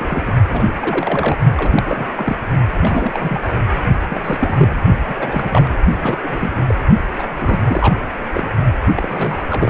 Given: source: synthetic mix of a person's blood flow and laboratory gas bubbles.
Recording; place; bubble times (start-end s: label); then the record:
Doppler ultrasound of blood flow; precordium
0.00-0.33 s: bubbles
0.48-0.73 s: bubbles
0.77-1.38 s: bubbles
1.56-2.12 s: bubbles
2.16-2.38 s: bubbles
2.82-3.41 s: bubbles
4.10-4.82 s: bubbles
5.08-5.14 s: bubbles
5.19-5.75 s: bubbles
6.02-6.19 s: bubbles
6.23-6.75 s: bubbles
7.19-7.27 s: bubbles
7.38-7.60 s: bubbles
7.64-7.97 s: bubbles
8.34-8.51 s: bubbles
8.95-9.45 s: bubbles
9.50-9.70 s: bubbles
From the record:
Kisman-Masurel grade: 342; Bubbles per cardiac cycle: rolling drumbeat, 9 or more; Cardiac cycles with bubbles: 100%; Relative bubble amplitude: moderate (0.250 to 0.450); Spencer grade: 3 (all of the cardiac periods contain showers or single bubble signals, but not dominating or overriding the cardiac motion signals); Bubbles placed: only in the low amplitude regions of the cardiac cycle